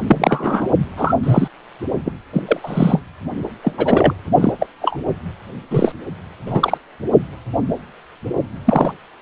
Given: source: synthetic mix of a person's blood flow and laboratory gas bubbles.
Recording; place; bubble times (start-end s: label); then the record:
Doppler ultrasound of blood flow; precordium
0.07-0.67 s: bubbles
0.97-1.15 s: bubbles
1.23-1.48 s: bubbles
2.05-2.12 s: bubbles
2.33-2.42 s: bubbles
2.47-2.60 s: bubbles
2.63-3.02 s: bubbles
3.62-4.14 s: bubbles
4.40-4.53 s: bubbles
4.59-4.66 s: bubbles
4.82-4.97 s: bubbles
5.71-5.92 s: bubbles
6.46-6.78 s: bubbles
8.65-8.94 s: bubbles
From the record:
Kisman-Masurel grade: 233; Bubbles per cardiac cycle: several, 3 to 8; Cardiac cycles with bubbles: 50 to 99%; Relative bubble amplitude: loud (0.450 to 0.775); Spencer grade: 3 (all of the cardiac periods contain showers or single bubble signals, but not dominating or overriding the cardiac motion signals); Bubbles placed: only in the low amplitude regions of the cardiac cycle